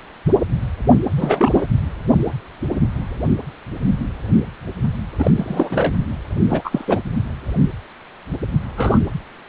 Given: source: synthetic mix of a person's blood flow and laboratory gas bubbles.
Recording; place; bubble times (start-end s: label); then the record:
Doppler ultrasound of blood flow; precordium
1.17-1.67 s: bubbles
5.18-5.31 s: bubbles
5.36-5.94 s: bubbles
6.48-6.62 s: bubbles
6.64-6.99 s: bubbles
8.77-9.04 s: bubbles
From the record:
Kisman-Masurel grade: 223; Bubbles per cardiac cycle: several, 3 to 8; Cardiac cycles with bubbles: 10 to 50%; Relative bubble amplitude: loud (0.450 to 0.775); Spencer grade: 2 (many but less than half of the cardiac periods contain bubble signals, singularly or in groups); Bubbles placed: anywhere in the cardiac cycle